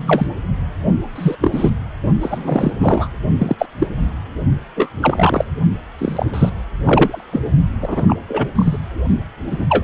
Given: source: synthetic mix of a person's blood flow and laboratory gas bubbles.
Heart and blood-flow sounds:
Doppler ultrasound of blood flow; precordium
0.00-0.27 s: bubbles
1.15-1.35 s: bubbles
1.41-1.70 s: bubbles
2.21-2.72 s: bubbles
2.78-3.08 s: bubbles
3.39-3.55 s: bubbles
3.58-3.66 s: bubbles
3.78-3.87 s: bubbles
4.75-4.89 s: bubbles
5.01-5.45 s: bubbles
5.98-6.26 s: bubbles
6.33-6.50 s: bubbles
6.83-7.24 s: bubbles
7.32-7.41 s: bubbles
7.80-8.17 s: bubbles
8.28-8.48 s: bubbles
8.55-8.77 s: bubbles
9.47-9.65 s: bubbles
9.69-9.84 s: bubbles
From the record:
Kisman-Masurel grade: 243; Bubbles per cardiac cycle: several, 3 to 8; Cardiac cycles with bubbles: 100%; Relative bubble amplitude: loud (0.450 to 0.775); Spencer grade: 3 (all of the cardiac periods contain showers or single bubble signals, but not dominating or overriding the cardiac motion signals); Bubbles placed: only in the low amplitude regions of the cardiac cycle

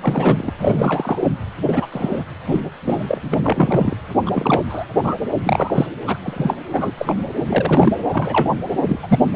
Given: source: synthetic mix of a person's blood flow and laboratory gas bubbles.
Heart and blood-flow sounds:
Doppler ultrasound of blood flow; precordium
0.01-0.52 s: bubbles
0.57-1.19 s: bubbles
1.24-1.31 s: bubbles
1.66-1.86 s: bubbles
1.92-2.23 s: bubbles
2.47-2.62 s: bubbles
2.85-3.20 s: bubbles
3.23-3.97 s: bubbles
4.25-4.63 s: bubbles
4.69-4.85 s: bubbles
5.03-5.14 s: bubbles
5.38-5.86 s: bubbles
6.06-6.17 s: bubbles
6.22-6.58 s: bubbles
6.72-6.92 s: bubbles
6.97-7.14 s: bubbles
7.47-7.92 s: bubbles
8.12-8.54 s: bubbles
8.88-8.99 s: bubbles
9.03-9.25 s: bubbles
From the record:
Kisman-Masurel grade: 243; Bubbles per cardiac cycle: several, 3 to 8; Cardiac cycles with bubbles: 100%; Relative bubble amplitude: loud (0.450 to 0.775); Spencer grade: 3 (all of the cardiac periods contain showers or single bubble signals, but not dominating or overriding the cardiac motion signals); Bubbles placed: anywhere in the cardiac cycle

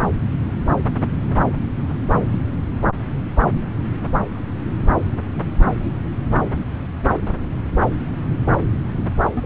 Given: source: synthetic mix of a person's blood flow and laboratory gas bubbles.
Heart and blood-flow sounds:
Doppler ultrasound of blood flow; subclavian vein
9.34-9.46 s: bubbles
From the record:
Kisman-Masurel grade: 211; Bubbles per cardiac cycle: several, 3 to 8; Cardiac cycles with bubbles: 1 to 10%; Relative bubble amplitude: barely perceptible (0.100 to 0.250); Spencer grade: 1 (occasional bubble signal discernible with the cardiac motion signal, with majority of cardiac periods free of bubbles); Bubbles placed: anywhere in the cardiac cycle

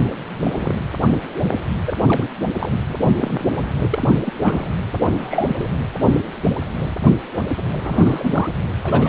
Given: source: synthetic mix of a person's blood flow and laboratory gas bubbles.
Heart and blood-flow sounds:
Doppler ultrasound of blood flow; precordium
0.43-0.76 s: bubbles
1.86-1.94 s: bubbles
2.03-2.30 s: bubbles
2.40-2.49 s: bubbles
2.59-2.71 s: bubbles
2.89-2.96 s: bubbles
3.01-3.54 s: bubbles
3.93-4.15 s: bubbles
4.21-4.74 s: bubbles
5.17-5.71 s: bubbles
7.84-8.49 s: bubbles
8.83-9.09 s: bubbles
From the record:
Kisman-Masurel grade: 232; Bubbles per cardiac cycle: several, 3 to 8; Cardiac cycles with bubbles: 50 to 99%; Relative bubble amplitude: moderate (0.250 to 0.450); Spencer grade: 3 (all of the cardiac periods contain showers or single bubble signals, but not dominating or overriding the cardiac motion signals); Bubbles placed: anywhere in the cardiac cycle

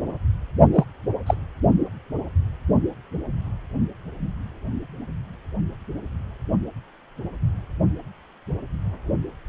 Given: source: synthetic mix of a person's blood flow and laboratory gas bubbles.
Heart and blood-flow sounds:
Doppler ultrasound of blood flow; precordium
0.72-0.84 s: bubbles
1.26-1.34 s: bubbles
From the record:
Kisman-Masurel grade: 112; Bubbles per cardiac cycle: 1 to 2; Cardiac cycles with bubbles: 1 to 10%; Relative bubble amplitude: moderate (0.250 to 0.450); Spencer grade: 1 (occasional bubble signal discernible with the cardiac motion signal, with majority of cardiac periods free of bubbles); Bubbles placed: only in the low amplitude regions of the cardiac cycle

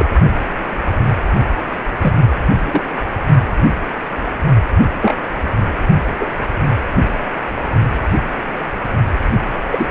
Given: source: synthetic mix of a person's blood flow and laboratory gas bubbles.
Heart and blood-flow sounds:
Doppler ultrasound of blood flow; precordium
0.00-0.05 s: bubbles
2.01-2.19 s: bubbles
2.65-2.82 s: bubbles
5.00-5.13 s: bubbles
6.20-6.25 s: bubbles
9.71-9.87 s: bubbles
From the record:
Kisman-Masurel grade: 122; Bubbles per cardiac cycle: 1 to 2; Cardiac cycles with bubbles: 10 to 50%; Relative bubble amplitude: moderate (0.250 to 0.450); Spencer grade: 2 (many but less than half of the cardiac periods contain bubble signals, singularly or in groups); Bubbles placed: only in the low amplitude regions of the cardiac cycle

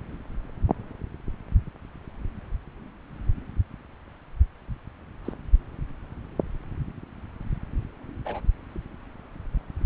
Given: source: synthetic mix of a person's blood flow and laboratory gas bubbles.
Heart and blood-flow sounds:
Doppler ultrasound of blood flow; subclavian vein
5.25-5.33 s: bubbles
8.25-8.42 s: bubbles
From the record:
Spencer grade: 2 (many but less than half of the cardiac periods contain bubble signals, singularly or in groups); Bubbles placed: anywhere in the cardiac cycle

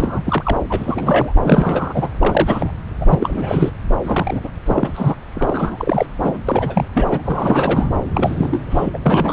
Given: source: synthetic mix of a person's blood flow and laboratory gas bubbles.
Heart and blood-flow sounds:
Doppler ultrasound of blood flow; subclavian vein
0.00-0.57 s: bubbles
0.69-1.33 s: bubbles
1.44-2.08 s: bubbles
2.19-2.72 s: bubbles
3.00-3.06 s: bubbles
3.08-3.71 s: bubbles
4.04-4.41 s: bubbles
4.43-4.50 s: bubbles
4.66-5.15 s: bubbles
5.35-6.07 s: bubbles
6.21-6.40 s: bubbles
6.47-6.86 s: bubbles
6.95-7.22 s: bubbles
7.25-7.91 s: bubbles
8.13-8.61 s: bubbles
8.69-8.90 s: bubbles
8.93-8.98 s: bubbles
9.05-9.33 s: bubbles
From the record:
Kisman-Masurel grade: 342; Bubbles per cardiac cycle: rolling drumbeat, 9 or more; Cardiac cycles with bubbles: 100%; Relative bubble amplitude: moderate (0.250 to 0.450); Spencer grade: 3 (all of the cardiac periods contain showers or single bubble signals, but not dominating or overriding the cardiac motion signals); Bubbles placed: anywhere in the cardiac cycle

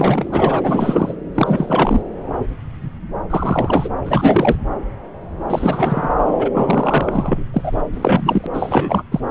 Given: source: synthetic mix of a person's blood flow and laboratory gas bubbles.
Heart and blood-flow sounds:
Doppler ultrasound of blood flow; subclavian vein
0.00-0.60 s: bubbles
0.63-1.14 s: bubbles
1.34-2.01 s: bubbles
3.29-3.90 s: bubbles
4.06-4.56 s: bubbles
5.48-6.09 s: bubbles
6.38-6.49 s: bubbles
6.54-7.44 s: bubbles
7.54-7.72 s: bubbles
7.93-8.46 s: bubbles
8.53-9.03 s: bubbles
9.11-9.20 s: bubbles
From the record:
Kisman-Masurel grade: 333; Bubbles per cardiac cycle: rolling drumbeat, 9 or more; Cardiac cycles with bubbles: 50 to 99%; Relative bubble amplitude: loud (0.450 to 0.775); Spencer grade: 3 (all of the cardiac periods contain showers or single bubble signals, but not dominating or overriding the cardiac motion signals); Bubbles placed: anywhere in the cardiac cycle

